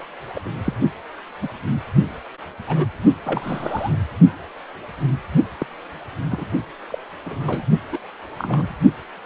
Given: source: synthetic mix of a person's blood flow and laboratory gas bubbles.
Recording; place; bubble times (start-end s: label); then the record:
Doppler ultrasound of blood flow; precordium
0.00-0.06 s: bubbles
0.35-0.40 s: bubbles
0.45-0.50 s: bubbles
0.65-0.74 s: bubbles
1.42-1.48 s: bubbles
1.67-1.82 s: bubbles
2.67-2.86 s: bubbles
3.25-3.95 s: bubbles
5.58-5.67 s: bubbles
6.29-6.47 s: bubbles
6.89-6.98 s: bubbles
7.24-7.62 s: bubbles
7.92-7.98 s: bubbles
8.38-8.76 s: bubbles
From the record:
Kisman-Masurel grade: 232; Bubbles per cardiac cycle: several, 3 to 8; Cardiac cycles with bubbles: 50 to 99%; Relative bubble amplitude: moderate (0.250 to 0.450); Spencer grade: 3 (all of the cardiac periods contain showers or single bubble signals, but not dominating or overriding the cardiac motion signals); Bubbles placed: only in the low amplitude regions of the cardiac cycle